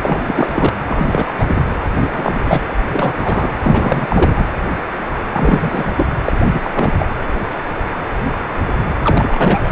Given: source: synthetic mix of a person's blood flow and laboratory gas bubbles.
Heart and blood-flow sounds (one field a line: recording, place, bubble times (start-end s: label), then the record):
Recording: Doppler ultrasound of blood flow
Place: precordium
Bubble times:
0.03-0.73 s: bubbles
0.89-1.07 s: bubbles
1.11-1.32 s: bubbles
1.39-1.62 s: bubbles
1.95-2.41 s: bubbles
2.45-2.62 s: bubbles
2.93-3.14 s: bubbles
3.17-3.50 s: bubbles
3.62-4.46 s: bubbles
5.32-6.06 s: bubbles
6.25-6.32 s: bubbles
6.51-6.71 s: bubbles
6.73-6.93 s: bubbles
6.98-7.06 s: bubbles
9.04-9.72 s: bubbles
From the record:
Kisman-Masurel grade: 332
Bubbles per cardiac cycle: rolling drumbeat, 9 or more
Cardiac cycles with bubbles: 50 to 99%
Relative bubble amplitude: moderate (0.250 to 0.450)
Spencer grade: 3 (all of the cardiac periods contain showers or single bubble signals, but not dominating or overriding the cardiac motion signals)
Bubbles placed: anywhere in the cardiac cycle